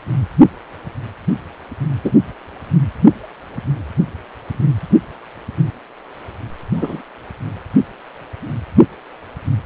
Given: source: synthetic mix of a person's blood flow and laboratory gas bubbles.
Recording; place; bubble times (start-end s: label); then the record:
Doppler ultrasound of blood flow; precordium
2.04-2.12 s: bubbles
6.76-7.02 s: bubbles
From the record:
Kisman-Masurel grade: 123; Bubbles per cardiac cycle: 1 to 2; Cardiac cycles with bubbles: 10 to 50%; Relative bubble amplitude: loud (0.450 to 0.775); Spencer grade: 2 (many but less than half of the cardiac periods contain bubble signals, singularly or in groups); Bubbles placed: anywhere in the cardiac cycle